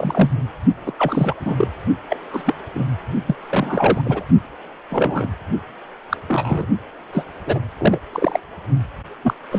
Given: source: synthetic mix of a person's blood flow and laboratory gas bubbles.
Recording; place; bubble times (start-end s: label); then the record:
Doppler ultrasound of blood flow; precordium
0.00-0.31 s: bubbles
0.85-0.92 s: bubbles
0.97-1.34 s: bubbles
1.40-1.68 s: bubbles
2.10-2.17 s: bubbles
2.33-2.54 s: bubbles
2.75-2.84 s: bubbles
3.27-3.36 s: bubbles
3.50-4.01 s: bubbles
4.04-4.23 s: bubbles
4.90-5.27 s: bubbles
6.10-6.17 s: bubbles
6.27-6.65 s: bubbles
7.12-7.25 s: bubbles
7.46-7.59 s: bubbles
7.77-7.98 s: bubbles
8.12-8.39 s: bubbles
9.23-9.33 s: bubbles
9.51-9.59 s: bubbles
From the record:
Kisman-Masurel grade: 242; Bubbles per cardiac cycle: several, 3 to 8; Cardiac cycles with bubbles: 100%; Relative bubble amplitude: moderate (0.250 to 0.450); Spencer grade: 3 (all of the cardiac periods contain showers or single bubble signals, but not dominating or overriding the cardiac motion signals); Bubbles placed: only in the low amplitude regions of the cardiac cycle